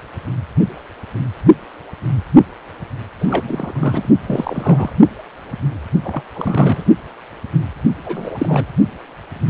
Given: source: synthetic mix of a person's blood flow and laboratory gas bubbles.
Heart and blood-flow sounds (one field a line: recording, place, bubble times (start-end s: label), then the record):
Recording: Doppler ultrasound of blood flow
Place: precordium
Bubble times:
3.21-4.09 s: bubbles
4.28-4.92 s: bubbles
6.02-6.23 s: bubbles
6.34-6.84 s: bubbles
8.04-8.66 s: bubbles
From the record:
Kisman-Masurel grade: 332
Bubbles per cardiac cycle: rolling drumbeat, 9 or more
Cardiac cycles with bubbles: 50 to 99%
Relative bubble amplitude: moderate (0.250 to 0.450)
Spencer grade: 3 (all of the cardiac periods contain showers or single bubble signals, but not dominating or overriding the cardiac motion signals)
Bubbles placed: only in the low amplitude regions of the cardiac cycle